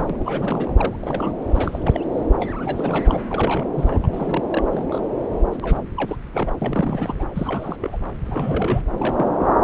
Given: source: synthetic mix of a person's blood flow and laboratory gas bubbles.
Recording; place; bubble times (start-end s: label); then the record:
Doppler ultrasound of blood flow; subclavian vein
0.00-0.06 s: bubbles
0.10-0.16 s: bubbles
0.20-0.74 s: bubbles
0.76-0.96 s: bubbles
1.00-1.33 s: bubbles
1.50-2.00 s: bubbles
2.38-3.02 s: bubbles
3.06-3.23 s: bubbles
3.29-3.65 s: bubbles
3.76-4.44 s: bubbles
4.49-5.07 s: bubbles
5.52-5.58 s: bubbles
5.62-5.81 s: bubbles
5.97-6.16 s: bubbles
6.33-7.26 s: bubbles
7.33-7.97 s: bubbles
8.25-8.83 s: bubbles
8.93-9.29 s: bubbles
9.39-9.47 s: bubbles
From the record:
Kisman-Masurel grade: 342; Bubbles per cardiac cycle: rolling drumbeat, 9 or more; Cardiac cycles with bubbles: 100%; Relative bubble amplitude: moderate (0.250 to 0.450); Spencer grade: 3 (all of the cardiac periods contain showers or single bubble signals, but not dominating or overriding the cardiac motion signals); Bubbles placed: anywhere in the cardiac cycle